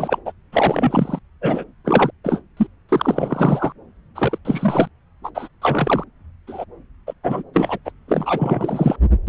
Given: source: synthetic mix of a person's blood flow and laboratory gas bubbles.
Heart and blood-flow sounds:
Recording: Doppler ultrasound of blood flow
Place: subclavian vein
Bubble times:
0.00-0.18 s: bubbles
0.25-0.32 s: bubbles
0.52-1.19 s: bubbles
1.41-1.64 s: bubbles
1.84-2.11 s: bubbles
2.24-2.41 s: bubbles
2.57-2.67 s: bubbles
2.88-3.72 s: bubbles
4.15-4.38 s: bubbles
4.45-4.88 s: bubbles
5.23-5.31 s: bubbles
5.35-5.48 s: bubbles
5.62-6.04 s: bubbles
6.47-6.65 s: bubbles
7.07-7.13 s: bubbles
7.24-7.42 s: bubbles
7.54-7.78 s: bubbles
7.85-7.91 s: bubbles
8.08-8.96 s: bubbles
9.27-9.29 s: bubbles
From the record:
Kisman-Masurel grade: 343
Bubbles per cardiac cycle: rolling drumbeat, 9 or more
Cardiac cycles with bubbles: 100%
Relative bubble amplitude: loud (0.450 to 0.775)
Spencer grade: 3 (all of the cardiac periods contain showers or single bubble signals, but not dominating or overriding the cardiac motion signals)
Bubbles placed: anywhere in the cardiac cycle

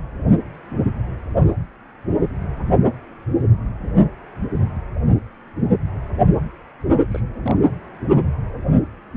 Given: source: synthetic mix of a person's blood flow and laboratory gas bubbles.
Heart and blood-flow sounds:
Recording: Doppler ultrasound of blood flow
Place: precordium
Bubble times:
7.12-7.21 s: bubbles
7.43-7.53 s: bubbles
From the record:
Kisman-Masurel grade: 121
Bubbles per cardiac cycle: 1 to 2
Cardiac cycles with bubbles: 10 to 50%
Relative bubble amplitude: barely perceptible (0.100 to 0.250)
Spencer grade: 2 (many but less than half of the cardiac periods contain bubble signals, singularly or in groups)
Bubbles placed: only in the low amplitude regions of the cardiac cycle

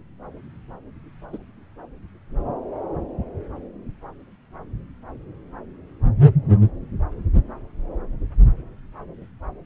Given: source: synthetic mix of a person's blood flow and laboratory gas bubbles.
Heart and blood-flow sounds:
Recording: Doppler ultrasound of blood flow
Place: subclavian vein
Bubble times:
1.32-1.38 s: bubbles
From the record:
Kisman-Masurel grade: 111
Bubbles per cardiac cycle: 1 to 2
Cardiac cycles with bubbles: 1 to 10%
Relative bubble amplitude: barely perceptible (0.100 to 0.250)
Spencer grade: 1 (occasional bubble signal discernible with the cardiac motion signal, with majority of cardiac periods free of bubbles)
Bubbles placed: anywhere in the cardiac cycle

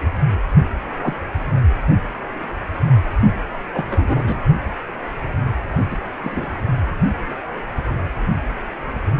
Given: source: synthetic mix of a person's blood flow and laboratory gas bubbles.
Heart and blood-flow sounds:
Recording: Doppler ultrasound of blood flow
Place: precordium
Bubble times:
1.02-1.14 s: bubbles
3.74-3.84 s: bubbles
3.89-4.41 s: bubbles
5.90-5.97 s: bubbles
6.24-6.51 s: bubbles
From the record:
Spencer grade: 2 (many but less than half of the cardiac periods contain bubble signals, singularly or in groups)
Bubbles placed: only in the low amplitude regions of the cardiac cycle

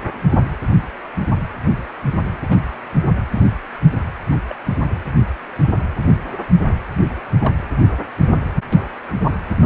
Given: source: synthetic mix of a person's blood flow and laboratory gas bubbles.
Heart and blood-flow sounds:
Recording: Doppler ultrasound of blood flow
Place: precordium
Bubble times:
2.48-2.58 s: bubbles
3.32-3.48 s: bubbles
4.32-4.36 s: bubbles
4.49-4.55 s: bubbles
6.32-6.37 s: bubbles
7.41-7.54 s: bubbles
From the record:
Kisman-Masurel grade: 121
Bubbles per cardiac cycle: 1 to 2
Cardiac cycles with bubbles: 10 to 50%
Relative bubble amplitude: barely perceptible (0.100 to 0.250)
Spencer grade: 2 (many but less than half of the cardiac periods contain bubble signals, singularly or in groups)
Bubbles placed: anywhere in the cardiac cycle

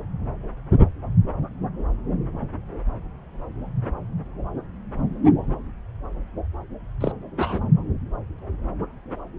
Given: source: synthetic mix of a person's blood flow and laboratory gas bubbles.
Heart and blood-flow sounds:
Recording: Doppler ultrasound of blood flow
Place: subclavian vein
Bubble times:
7.00-7.12 s: bubbles
7.37-7.60 s: bubbles
From the record:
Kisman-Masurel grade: 112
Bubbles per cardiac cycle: 1 to 2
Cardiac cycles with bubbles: 1 to 10%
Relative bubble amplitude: moderate (0.250 to 0.450)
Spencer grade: 1 (occasional bubble signal discernible with the cardiac motion signal, with majority of cardiac periods free of bubbles)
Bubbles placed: anywhere in the cardiac cycle

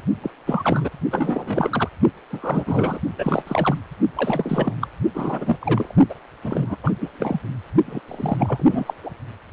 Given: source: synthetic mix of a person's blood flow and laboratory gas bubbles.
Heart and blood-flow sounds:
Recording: Doppler ultrasound of blood flow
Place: precordium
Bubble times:
0.22-0.31 s: bubbles
0.46-0.90 s: bubbles
1.10-1.88 s: bubbles
2.29-3.00 s: bubbles
3.17-3.42 s: bubbles
3.46-3.81 s: bubbles
4.16-4.74 s: bubbles
4.81-4.87 s: bubbles
5.14-5.57 s: bubbles
5.61-5.93 s: bubbles
6.09-6.14 s: bubbles
6.44-6.77 s: bubbles
6.83-6.93 s: bubbles
7.01-7.10 s: bubbles
7.13-7.41 s: bubbles
7.86-8.01 s: bubbles
8.08-8.68 s: bubbles
8.70-8.94 s: bubbles
9.03-9.11 s: bubbles
From the record:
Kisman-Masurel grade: 343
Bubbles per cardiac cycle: rolling drumbeat, 9 or more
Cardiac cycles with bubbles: 100%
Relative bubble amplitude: loud (0.450 to 0.775)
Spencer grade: 3 (all of the cardiac periods contain showers or single bubble signals, but not dominating or overriding the cardiac motion signals)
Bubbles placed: only in the low amplitude regions of the cardiac cycle

